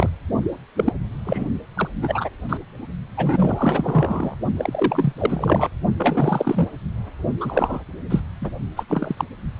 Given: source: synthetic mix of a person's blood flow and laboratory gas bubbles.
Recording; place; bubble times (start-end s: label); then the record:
Doppler ultrasound of blood flow; precordium
0.00-0.09 s: bubbles
0.76-0.93 s: bubbles
1.25-1.45 s: bubbles
1.77-1.88 s: bubbles
2.01-2.29 s: bubbles
2.49-2.58 s: bubbles
3.17-4.37 s: bubbles
4.57-5.13 s: bubbles
5.18-5.68 s: bubbles
5.97-6.67 s: bubbles
7.40-7.84 s: bubbles
8.09-8.21 s: bubbles
8.41-8.49 s: bubbles
8.76-8.84 s: bubbles
8.88-9.24 s: bubbles
From the record:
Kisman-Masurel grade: 242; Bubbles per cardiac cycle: several, 3 to 8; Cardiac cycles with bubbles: 100%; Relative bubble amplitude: moderate (0.250 to 0.450); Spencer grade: 3 (all of the cardiac periods contain showers or single bubble signals, but not dominating or overriding the cardiac motion signals); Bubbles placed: only in the low amplitude regions of the cardiac cycle